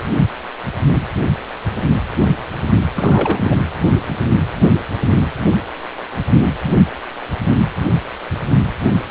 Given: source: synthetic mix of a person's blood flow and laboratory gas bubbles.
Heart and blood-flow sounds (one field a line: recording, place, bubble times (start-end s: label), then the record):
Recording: Doppler ultrasound of blood flow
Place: precordium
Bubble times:
2.95-3.58 s: bubbles
From the record:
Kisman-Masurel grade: 212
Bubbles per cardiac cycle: several, 3 to 8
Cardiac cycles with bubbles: 1 to 10%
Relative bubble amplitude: moderate (0.250 to 0.450)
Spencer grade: 1 (occasional bubble signal discernible with the cardiac motion signal, with majority of cardiac periods free of bubbles)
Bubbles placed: anywhere in the cardiac cycle